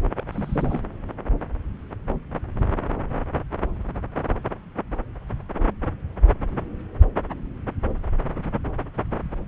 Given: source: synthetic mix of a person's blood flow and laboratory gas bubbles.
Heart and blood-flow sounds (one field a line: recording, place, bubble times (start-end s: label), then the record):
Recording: Doppler ultrasound of blood flow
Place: subclavian vein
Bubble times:
0.17-0.23 s: bubbles
0.32-0.80 s: bubbles
From the record:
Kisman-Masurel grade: 211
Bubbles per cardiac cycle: several, 3 to 8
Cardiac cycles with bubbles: 1 to 10%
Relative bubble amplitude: barely perceptible (0.100 to 0.250)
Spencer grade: 1 (occasional bubble signal discernible with the cardiac motion signal, with majority of cardiac periods free of bubbles)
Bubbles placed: anywhere in the cardiac cycle